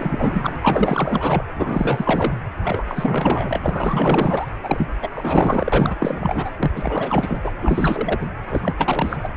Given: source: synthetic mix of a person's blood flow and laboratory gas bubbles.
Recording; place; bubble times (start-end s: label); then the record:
Doppler ultrasound of blood flow; precordium
0.00-0.56 s: bubbles
0.65-1.44 s: bubbles
1.55-2.34 s: bubbles
2.63-2.83 s: bubbles
2.87-3.58 s: bubbles
3.62-4.49 s: bubbles
4.63-4.87 s: bubbles
5.02-5.96 s: bubbles
6.00-6.50 s: bubbles
6.57-6.71 s: bubbles
6.75-7.40 s: bubbles
7.44-7.52 s: bubbles
7.62-8.29 s: bubbles
8.50-8.74 s: bubbles
8.77-9.18 s: bubbles
9.22-9.29 s: bubbles
From the record:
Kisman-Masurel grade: 444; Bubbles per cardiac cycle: continuous sound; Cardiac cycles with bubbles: 100%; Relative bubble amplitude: maximal (0.775 to 0.999); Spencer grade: 4 (maximum detectable bubble signal sounding continuously throughout systole and diastole of every cardiac period, and overriding the amplitude of the normal cardiac signals); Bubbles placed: anywhere in the cardiac cycle